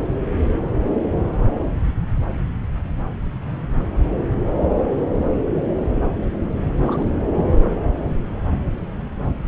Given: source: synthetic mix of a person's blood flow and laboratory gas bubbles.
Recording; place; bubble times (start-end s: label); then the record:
Doppler ultrasound of blood flow; subclavian vein
6.80-7.04 s: bubbles
7.32-7.46 s: bubbles
7.50-7.57 s: bubbles
From the record:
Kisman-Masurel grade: 211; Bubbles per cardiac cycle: several, 3 to 8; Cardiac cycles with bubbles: 1 to 10%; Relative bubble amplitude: barely perceptible (0.100 to 0.250); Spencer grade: 1 (occasional bubble signal discernible with the cardiac motion signal, with majority of cardiac periods free of bubbles); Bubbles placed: anywhere in the cardiac cycle